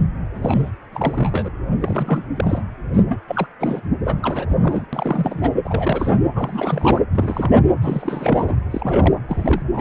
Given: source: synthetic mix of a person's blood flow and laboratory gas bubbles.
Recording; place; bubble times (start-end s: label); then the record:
Doppler ultrasound of blood flow; precordium
0.34-0.70 s: bubbles
0.93-1.50 s: bubbles
1.81-2.24 s: bubbles
2.36-2.64 s: bubbles
2.93-3.04 s: bubbles
3.08-3.21 s: bubbles
3.28-3.47 s: bubbles
3.60-3.81 s: bubbles
4.04-4.46 s: bubbles
4.48-4.86 s: bubbles
4.92-5.52 s: bubbles
5.64-6.14 s: bubbles
6.35-7.01 s: bubbles
7.11-7.62 s: bubbles
7.81-8.56 s: bubbles
8.71-9.14 s: bubbles
9.28-9.62 s: bubbles
9.73-9.81 s: bubbles
From the record:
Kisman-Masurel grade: 342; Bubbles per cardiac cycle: rolling drumbeat, 9 or more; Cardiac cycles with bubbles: 100%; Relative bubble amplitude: moderate (0.250 to 0.450); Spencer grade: 3 (all of the cardiac periods contain showers or single bubble signals, but not dominating or overriding the cardiac motion signals); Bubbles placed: anywhere in the cardiac cycle